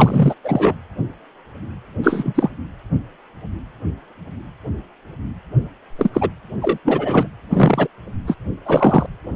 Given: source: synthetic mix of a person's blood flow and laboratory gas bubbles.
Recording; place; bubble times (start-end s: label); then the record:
Doppler ultrasound of blood flow; precordium
0.00-0.35 s: bubbles
0.43-0.76 s: bubbles
2.03-2.49 s: bubbles
5.98-6.10 s: bubbles
6.13-6.29 s: bubbles
6.62-6.78 s: bubbles
6.84-7.26 s: bubbles
7.50-7.88 s: bubbles
8.27-8.35 s: bubbles
8.65-9.06 s: bubbles
From the record:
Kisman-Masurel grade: 233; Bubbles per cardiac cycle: several, 3 to 8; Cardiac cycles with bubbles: 50 to 99%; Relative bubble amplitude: loud (0.450 to 0.775); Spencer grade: 3 (all of the cardiac periods contain showers or single bubble signals, but not dominating or overriding the cardiac motion signals); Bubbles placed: anywhere in the cardiac cycle